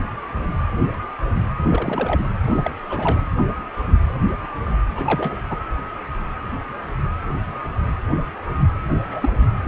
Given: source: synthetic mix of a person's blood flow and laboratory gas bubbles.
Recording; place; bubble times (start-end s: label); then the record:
Doppler ultrasound of blood flow; precordium
1.70-2.27 s: bubbles
2.44-2.71 s: bubbles
2.90-3.20 s: bubbles
4.95-5.35 s: bubbles
5.50-5.58 s: bubbles
9.05-9.30 s: bubbles
9.42-9.48 s: bubbles
From the record:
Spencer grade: 2 (many but less than half of the cardiac periods contain bubble signals, singularly or in groups); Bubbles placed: anywhere in the cardiac cycle